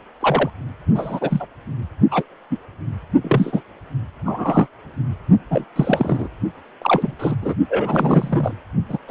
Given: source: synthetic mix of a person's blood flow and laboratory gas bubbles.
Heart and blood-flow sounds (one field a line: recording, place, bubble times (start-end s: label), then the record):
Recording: Doppler ultrasound of blood flow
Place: precordium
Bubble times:
0.21-0.50 s: bubbles
0.95-1.46 s: bubbles
2.10-2.23 s: bubbles
2.50-2.57 s: bubbles
3.24-3.61 s: bubbles
4.25-4.67 s: bubbles
5.50-5.64 s: bubbles
5.75-6.29 s: bubbles
6.81-7.16 s: bubbles
7.19-7.35 s: bubbles
7.42-7.54 s: bubbles
7.68-8.56 s: bubbles
8.89-8.98 s: bubbles
9.08-9.11 s: bubbles
From the record:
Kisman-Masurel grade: 243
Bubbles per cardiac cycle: several, 3 to 8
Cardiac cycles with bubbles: 100%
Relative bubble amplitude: loud (0.450 to 0.775)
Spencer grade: 3 (all of the cardiac periods contain showers or single bubble signals, but not dominating or overriding the cardiac motion signals)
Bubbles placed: only in the low amplitude regions of the cardiac cycle